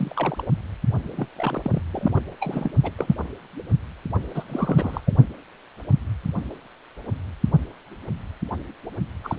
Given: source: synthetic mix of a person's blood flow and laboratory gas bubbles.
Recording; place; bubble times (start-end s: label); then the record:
Doppler ultrasound of blood flow; precordium
0.00-0.48 s: bubbles
1.16-1.29 s: bubbles
1.36-1.82 s: bubbles
1.92-2.19 s: bubbles
2.40-2.71 s: bubbles
2.83-2.91 s: bubbles
2.98-3.15 s: bubbles
4.34-4.44 s: bubbles
4.48-5.01 s: bubbles
5.06-5.13 s: bubbles
9.24-9.36 s: bubbles
From the record:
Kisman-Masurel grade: 232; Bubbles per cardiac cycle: several, 3 to 8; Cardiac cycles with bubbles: 50 to 99%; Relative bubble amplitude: moderate (0.250 to 0.450); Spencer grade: 3 (all of the cardiac periods contain showers or single bubble signals, but not dominating or overriding the cardiac motion signals); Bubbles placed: only in the low amplitude regions of the cardiac cycle